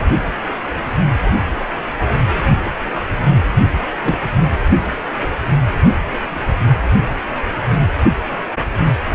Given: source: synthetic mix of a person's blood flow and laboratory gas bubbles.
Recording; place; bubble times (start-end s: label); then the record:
Doppler ultrasound of blood flow; precordium
4.02-4.18 s: bubbles
From the record:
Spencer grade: 2 (many but less than half of the cardiac periods contain bubble signals, singularly or in groups); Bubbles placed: only in the low amplitude regions of the cardiac cycle